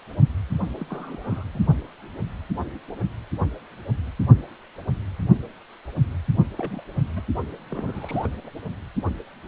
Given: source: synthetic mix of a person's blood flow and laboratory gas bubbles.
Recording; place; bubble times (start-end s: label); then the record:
Doppler ultrasound of blood flow; precordium
0.80-0.85 s: bubbles
0.90-1.43 s: bubbles
1.54-1.59 s: bubbles
6.57-6.81 s: bubbles
7.16-7.21 s: bubbles
7.69-8.29 s: bubbles
8.46-8.50 s: bubbles
From the record:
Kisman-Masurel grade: 221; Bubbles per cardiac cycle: several, 3 to 8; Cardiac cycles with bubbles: 10 to 50%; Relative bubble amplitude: barely perceptible (0.100 to 0.250); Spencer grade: 2 (many but less than half of the cardiac periods contain bubble signals, singularly or in groups); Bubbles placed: only in the low amplitude regions of the cardiac cycle